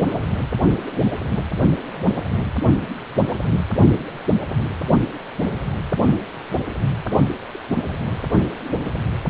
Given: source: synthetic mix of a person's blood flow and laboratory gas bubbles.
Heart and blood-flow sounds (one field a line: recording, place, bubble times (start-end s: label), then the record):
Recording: Doppler ultrasound of blood flow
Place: precordium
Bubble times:
7.53-7.58 s: bubbles
8.01-8.09 s: bubbles
From the record:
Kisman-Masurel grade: 121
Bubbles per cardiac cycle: 1 to 2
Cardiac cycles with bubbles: 10 to 50%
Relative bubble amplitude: barely perceptible (0.100 to 0.250)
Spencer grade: 2 (many but less than half of the cardiac periods contain bubble signals, singularly or in groups)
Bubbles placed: only in the low amplitude regions of the cardiac cycle